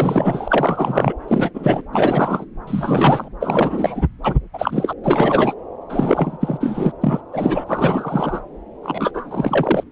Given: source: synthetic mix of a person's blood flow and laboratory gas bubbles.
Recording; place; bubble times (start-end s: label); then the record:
Doppler ultrasound of blood flow; subclavian vein
0.00-1.15 s: bubbles
1.27-1.50 s: bubbles
1.54-1.81 s: bubbles
1.92-2.45 s: bubbles
2.67-3.29 s: bubbles
3.41-4.08 s: bubbles
4.23-4.35 s: bubbles
4.53-4.93 s: bubbles
5.04-5.54 s: bubbles
5.89-6.92 s: bubbles
7.01-7.21 s: bubbles
7.32-8.41 s: bubbles
8.83-9.11 s: bubbles
9.13-9.84 s: bubbles
From the record:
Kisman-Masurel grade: 343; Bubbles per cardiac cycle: rolling drumbeat, 9 or more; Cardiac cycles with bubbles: 100%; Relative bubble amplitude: loud (0.450 to 0.775); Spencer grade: 3 (all of the cardiac periods contain showers or single bubble signals, but not dominating or overriding the cardiac motion signals); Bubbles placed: anywhere in the cardiac cycle